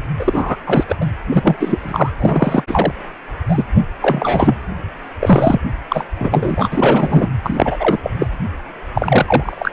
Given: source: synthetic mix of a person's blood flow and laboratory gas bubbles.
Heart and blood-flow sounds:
Doppler ultrasound of blood flow; precordium
0.19-0.56 s: bubbles
0.66-0.84 s: bubbles
0.88-0.95 s: bubbles
1.01-1.06 s: bubbles
1.31-2.14 s: bubbles
2.19-2.63 s: bubbles
2.67-2.93 s: bubbles
3.48-3.64 s: bubbles
4.00-4.55 s: bubbles
5.20-5.61 s: bubbles
5.89-6.04 s: bubbles
6.19-6.69 s: bubbles
6.72-7.27 s: bubbles
7.43-7.97 s: bubbles
8.03-8.11 s: bubbles
8.19-8.28 s: bubbles
8.95-9.71 s: bubbles
From the record:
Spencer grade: 3 (all of the cardiac periods contain showers or single bubble signals, but not dominating or overriding the cardiac motion signals); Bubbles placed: anywhere in the cardiac cycle

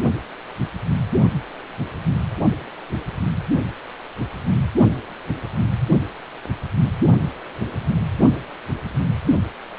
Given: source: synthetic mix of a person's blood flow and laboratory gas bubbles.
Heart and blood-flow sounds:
Doppler ultrasound of blood flow; precordium
no bubbles
From the record:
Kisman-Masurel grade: 000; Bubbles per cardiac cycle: 0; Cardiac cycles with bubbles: 0%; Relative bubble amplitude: no bubbles discernible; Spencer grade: 0 (complete lack of bubble signals)

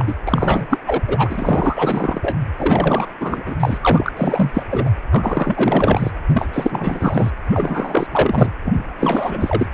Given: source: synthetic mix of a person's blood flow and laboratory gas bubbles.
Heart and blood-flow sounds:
Doppler ultrasound of blood flow; precordium
0.00-0.14 s: bubbles
0.27-0.66 s: bubbles
0.69-0.79 s: bubbles
0.86-1.01 s: bubbles
1.07-2.39 s: bubbles
2.58-3.06 s: bubbles
3.20-3.43 s: bubbles
3.46-3.56 s: bubbles
3.60-3.78 s: bubbles
3.81-4.12 s: bubbles
4.16-4.64 s: bubbles
4.70-4.92 s: bubbles
5.11-6.10 s: bubbles
6.29-6.47 s: bubbles
6.52-7.31 s: bubbles
7.51-8.07 s: bubbles
8.12-8.51 s: bubbles
8.63-9.68 s: bubbles
From the record:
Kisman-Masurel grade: 444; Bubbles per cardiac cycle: continuous sound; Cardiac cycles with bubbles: 100%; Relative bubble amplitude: maximal (0.775 to 0.999); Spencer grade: 4 (maximum detectable bubble signal sounding continuously throughout systole and diastole of every cardiac period, and overriding the amplitude of the normal cardiac signals); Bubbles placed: anywhere in the cardiac cycle

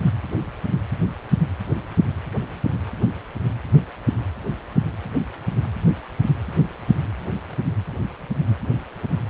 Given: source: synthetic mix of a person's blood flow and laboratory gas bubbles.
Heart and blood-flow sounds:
Doppler ultrasound of blood flow; precordium
no bubbles
From the record:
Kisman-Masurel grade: 000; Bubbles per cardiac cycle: 0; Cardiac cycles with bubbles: 0%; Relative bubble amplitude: no bubbles discernible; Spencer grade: 0 (complete lack of bubble signals)

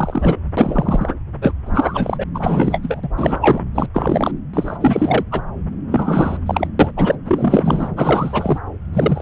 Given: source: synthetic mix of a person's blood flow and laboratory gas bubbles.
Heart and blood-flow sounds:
Doppler ultrasound of blood flow; subclavian vein
0.00-0.37 s: bubbles
0.57-1.15 s: bubbles
1.41-1.52 s: bubbles
1.66-2.24 s: bubbles
2.34-3.00 s: bubbles
3.03-3.08 s: bubbles
3.17-3.61 s: bubbles
3.74-3.88 s: bubbles
3.94-4.31 s: bubbles
4.54-4.77 s: bubbles
4.80-5.24 s: bubbles
5.31-5.42 s: bubbles
5.91-6.42 s: bubbles
6.46-6.67 s: bubbles
6.79-6.91 s: bubbles
6.96-7.16 s: bubbles
7.25-7.88 s: bubbles
7.96-8.58 s: bubbles
8.93-9.22 s: bubbles
From the record:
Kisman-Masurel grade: 343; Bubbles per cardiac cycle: rolling drumbeat, 9 or more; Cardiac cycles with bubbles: 100%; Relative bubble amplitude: loud (0.450 to 0.775); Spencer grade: 3 (all of the cardiac periods contain showers or single bubble signals, but not dominating or overriding the cardiac motion signals); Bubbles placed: anywhere in the cardiac cycle

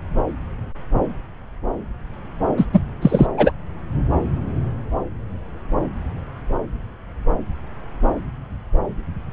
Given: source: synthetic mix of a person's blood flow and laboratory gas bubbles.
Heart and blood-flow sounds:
Doppler ultrasound of blood flow; subclavian vein
2.57-2.65 s: bubbles
2.73-2.81 s: bubbles
3.01-3.26 s: bubbles
3.36-3.51 s: bubbles
From the record:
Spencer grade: 1 (occasional bubble signal discernible with the cardiac motion signal, with majority of cardiac periods free of bubbles); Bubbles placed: anywhere in the cardiac cycle

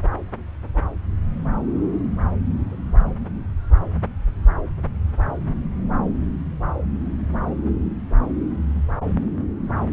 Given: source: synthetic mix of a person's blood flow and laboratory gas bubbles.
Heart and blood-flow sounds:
Doppler ultrasound of blood flow; subclavian vein
2.71-2.75 s: bubbles
From the record:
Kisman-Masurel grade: 111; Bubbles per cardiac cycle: 1 to 2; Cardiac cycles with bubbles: 1 to 10%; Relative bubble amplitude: barely perceptible (0.100 to 0.250); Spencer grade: 1 (occasional bubble signal discernible with the cardiac motion signal, with majority of cardiac periods free of bubbles); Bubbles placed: anywhere in the cardiac cycle

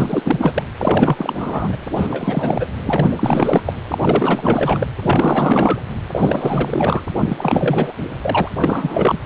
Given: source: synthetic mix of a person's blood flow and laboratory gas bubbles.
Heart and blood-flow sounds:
Doppler ultrasound of blood flow; precordium
0.00-0.63 s: bubbles
0.77-1.77 s: bubbles
1.83-1.87 s: bubbles
1.96-2.67 s: bubbles
2.86-3.12 s: bubbles
3.15-3.73 s: bubbles
3.90-3.98 s: bubbles
4.00-4.88 s: bubbles
5.00-5.81 s: bubbles
6.12-7.00 s: bubbles
7.20-7.93 s: bubbles
8.21-8.49 s: bubbles
8.62-9.19 s: bubbles
From the record:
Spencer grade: 4 (maximum detectable bubble signal sounding continuously throughout systole and diastole of every cardiac period, and overriding the amplitude of the normal cardiac signals); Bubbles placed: anywhere in the cardiac cycle

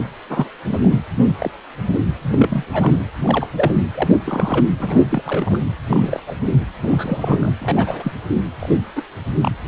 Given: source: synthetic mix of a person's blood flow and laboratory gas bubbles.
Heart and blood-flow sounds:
Doppler ultrasound of blood flow; precordium
0.29-0.49 s: bubbles
0.66-1.03 s: bubbles
1.07-1.09 s: bubbles
1.18-1.33 s: bubbles
1.39-1.50 s: bubbles
2.21-2.64 s: bubbles
2.72-2.96 s: bubbles
3.24-3.47 s: bubbles
3.54-3.73 s: bubbles
3.94-4.18 s: bubbles
4.25-4.66 s: bubbles
4.79-5.07 s: bubbles
5.10-5.62 s: bubbles
5.89-6.20 s: bubbles
6.27-6.37 s: bubbles
6.83-7.52 s: bubbles
7.58-8.12 s: bubbles
8.59-8.78 s: bubbles
8.96-9.02 s: bubbles
9.37-9.52 s: bubbles
9.64-9.68 s: bubbles
From the record:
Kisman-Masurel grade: 242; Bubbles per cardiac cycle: several, 3 to 8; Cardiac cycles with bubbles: 100%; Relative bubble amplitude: moderate (0.250 to 0.450); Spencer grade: 3 (all of the cardiac periods contain showers or single bubble signals, but not dominating or overriding the cardiac motion signals); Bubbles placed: anywhere in the cardiac cycle

